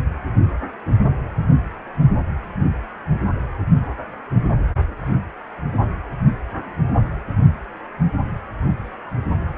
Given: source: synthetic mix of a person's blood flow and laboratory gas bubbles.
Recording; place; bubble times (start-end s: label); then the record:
Doppler ultrasound of blood flow; precordium
no bubbles
From the record:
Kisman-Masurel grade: 000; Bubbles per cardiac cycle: 0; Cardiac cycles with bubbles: 0%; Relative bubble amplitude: no bubbles discernible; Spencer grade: 0 (complete lack of bubble signals)